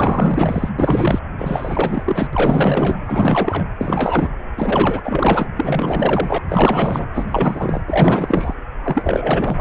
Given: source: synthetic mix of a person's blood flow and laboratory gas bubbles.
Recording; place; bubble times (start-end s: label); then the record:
Doppler ultrasound of blood flow; precordium
0.00-0.69 s: bubbles
0.78-1.19 s: bubbles
1.38-2.27 s: bubbles
2.33-3.02 s: bubbles
3.05-3.64 s: bubbles
3.80-4.29 s: bubbles
4.57-5.47 s: bubbles
5.55-6.38 s: bubbles
6.48-7.08 s: bubbles
7.13-7.81 s: bubbles
7.86-8.54 s: bubbles
8.83-9.61 s: bubbles
From the record:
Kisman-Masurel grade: 444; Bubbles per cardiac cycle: continuous sound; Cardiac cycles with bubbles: 100%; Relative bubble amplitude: maximal (0.775 to 0.999); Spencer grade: 4 (maximum detectable bubble signal sounding continuously throughout systole and diastole of every cardiac period, and overriding the amplitude of the normal cardiac signals); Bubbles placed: anywhere in the cardiac cycle